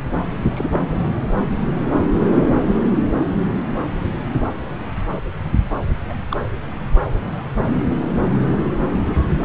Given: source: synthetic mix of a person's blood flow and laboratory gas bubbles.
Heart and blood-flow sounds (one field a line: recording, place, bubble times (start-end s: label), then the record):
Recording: Doppler ultrasound of blood flow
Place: subclavian vein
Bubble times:
0.53-0.81 s: bubbles
6.08-6.13 s: bubbles
6.29-6.37 s: bubbles
From the record:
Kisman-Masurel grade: 112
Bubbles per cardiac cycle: 1 to 2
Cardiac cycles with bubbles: 1 to 10%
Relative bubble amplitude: moderate (0.250 to 0.450)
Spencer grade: 1 (occasional bubble signal discernible with the cardiac motion signal, with majority of cardiac periods free of bubbles)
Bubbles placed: anywhere in the cardiac cycle